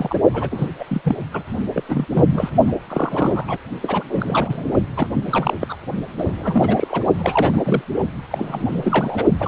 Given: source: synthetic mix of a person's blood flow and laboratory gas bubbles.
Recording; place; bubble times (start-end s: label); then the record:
Doppler ultrasound of blood flow; precordium
0.00-0.18 s: bubbles
0.33-0.68 s: bubbles
0.79-0.84 s: bubbles
0.88-1.01 s: bubbles
1.04-1.17 s: bubbles
1.33-1.43 s: bubbles
1.73-1.83 s: bubbles
1.89-2.06 s: bubbles
2.14-2.50 s: bubbles
2.67-2.73 s: bubbles
2.88-3.57 s: bubbles
3.82-4.04 s: bubbles
4.09-4.72 s: bubbles
4.96-5.07 s: bubbles
5.13-5.54 s: bubbles
5.61-5.76 s: bubbles
6.17-7.04 s: bubbles
7.18-7.82 s: bubbles
8.30-9.25 s: bubbles
9.39-9.48 s: bubbles
From the record:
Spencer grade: 3 (all of the cardiac periods contain showers or single bubble signals, but not dominating or overriding the cardiac motion signals); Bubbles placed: only in the low amplitude regions of the cardiac cycle